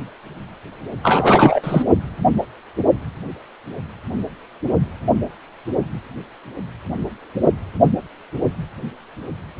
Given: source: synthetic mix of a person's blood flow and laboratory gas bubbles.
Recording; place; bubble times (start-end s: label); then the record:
Doppler ultrasound of blood flow; precordium
1.03-1.82 s: bubbles
From the record:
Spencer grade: 1 (occasional bubble signal discernible with the cardiac motion signal, with majority of cardiac periods free of bubbles); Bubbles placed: only in the low amplitude regions of the cardiac cycle